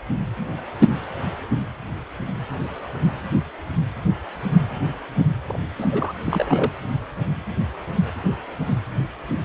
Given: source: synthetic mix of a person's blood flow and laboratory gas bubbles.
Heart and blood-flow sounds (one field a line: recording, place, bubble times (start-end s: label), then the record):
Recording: Doppler ultrasound of blood flow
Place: precordium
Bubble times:
5.47-5.59 s: bubbles
5.78-5.87 s: bubbles
5.91-6.12 s: bubbles
6.25-6.72 s: bubbles
From the record:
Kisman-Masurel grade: 211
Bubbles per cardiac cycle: several, 3 to 8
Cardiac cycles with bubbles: 1 to 10%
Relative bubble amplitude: barely perceptible (0.100 to 0.250)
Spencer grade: 1 (occasional bubble signal discernible with the cardiac motion signal, with majority of cardiac periods free of bubbles)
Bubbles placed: anywhere in the cardiac cycle